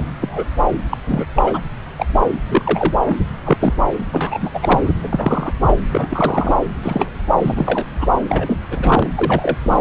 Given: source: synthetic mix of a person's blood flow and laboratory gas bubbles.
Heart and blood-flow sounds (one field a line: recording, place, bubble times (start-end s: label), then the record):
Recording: Doppler ultrasound of blood flow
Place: subclavian vein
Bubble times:
0.00-0.03 s: bubbles
0.21-0.43 s: bubbles
0.91-0.97 s: bubbles
1.07-1.26 s: bubbles
1.34-1.43 s: bubbles
1.45-1.60 s: bubbles
1.98-2.06 s: bubbles
2.49-2.94 s: bubbles
3.04-3.15 s: bubbles
3.46-3.57 s: bubbles
3.60-3.73 s: bubbles
4.12-4.51 s: bubbles
4.54-4.59 s: bubbles
4.62-4.93 s: bubbles
5.03-5.52 s: bubbles
5.62-5.82 s: bubbles
5.91-6.07 s: bubbles
6.10-6.57 s: bubbles
6.82-7.10 s: bubbles
7.39-7.85 s: bubbles
7.99-8.06 s: bubbles
8.29-8.60 s: bubbles
8.71-9.09 s: bubbles
9.15-9.58 s: bubbles
9.63-9.80 s: bubbles
From the record:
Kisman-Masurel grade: 242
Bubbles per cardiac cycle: several, 3 to 8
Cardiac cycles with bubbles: 100%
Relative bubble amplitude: moderate (0.250 to 0.450)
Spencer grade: 3 (all of the cardiac periods contain showers or single bubble signals, but not dominating or overriding the cardiac motion signals)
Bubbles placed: anywhere in the cardiac cycle